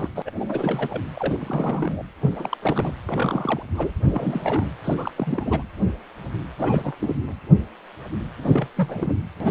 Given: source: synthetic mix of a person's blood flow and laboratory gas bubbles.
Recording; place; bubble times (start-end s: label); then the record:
Doppler ultrasound of blood flow; precordium
0.00-0.09 s: bubbles
0.15-0.22 s: bubbles
0.26-0.31 s: bubbles
0.38-1.01 s: bubbles
1.17-1.38 s: bubbles
1.41-2.03 s: bubbles
2.21-2.57 s: bubbles
2.62-2.95 s: bubbles
3.08-3.62 s: bubbles
3.75-3.91 s: bubbles
4.09-4.67 s: bubbles
4.84-5.12 s: bubbles
5.16-5.63 s: bubbles
6.58-6.92 s: bubbles
7.01-7.15 s: bubbles
8.41-8.67 s: bubbles
8.76-9.13 s: bubbles
9.40-9.51 s: bubbles
From the record:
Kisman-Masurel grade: 332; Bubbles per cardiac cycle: rolling drumbeat, 9 or more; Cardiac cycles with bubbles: 50 to 99%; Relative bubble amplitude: moderate (0.250 to 0.450); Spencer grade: 3 (all of the cardiac periods contain showers or single bubble signals, but not dominating or overriding the cardiac motion signals); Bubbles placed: anywhere in the cardiac cycle